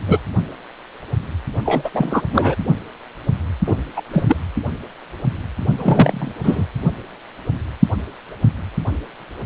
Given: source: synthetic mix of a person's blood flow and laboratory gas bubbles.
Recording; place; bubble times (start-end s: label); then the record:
Doppler ultrasound of blood flow; precordium
0.07-0.18 s: bubbles
1.65-1.90 s: bubbles
1.94-2.21 s: bubbles
2.32-2.55 s: bubbles
3.66-3.76 s: bubbles
3.96-4.02 s: bubbles
4.12-4.25 s: bubbles
4.28-4.37 s: bubbles
5.78-6.32 s: bubbles
6.44-6.65 s: bubbles
From the record:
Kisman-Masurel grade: 223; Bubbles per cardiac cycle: several, 3 to 8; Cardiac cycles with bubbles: 10 to 50%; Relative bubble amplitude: loud (0.450 to 0.775); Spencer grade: 2 (many but less than half of the cardiac periods contain bubble signals, singularly or in groups); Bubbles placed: only in the low amplitude regions of the cardiac cycle